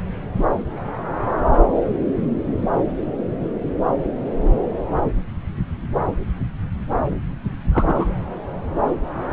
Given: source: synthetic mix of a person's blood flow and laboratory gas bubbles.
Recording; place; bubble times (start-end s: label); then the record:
Doppler ultrasound of blood flow; subclavian vein
7.71-8.08 s: bubbles
From the record:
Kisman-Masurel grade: 112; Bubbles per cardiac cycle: 1 to 2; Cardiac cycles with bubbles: 1 to 10%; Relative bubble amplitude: moderate (0.250 to 0.450); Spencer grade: 1 (occasional bubble signal discernible with the cardiac motion signal, with majority of cardiac periods free of bubbles); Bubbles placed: anywhere in the cardiac cycle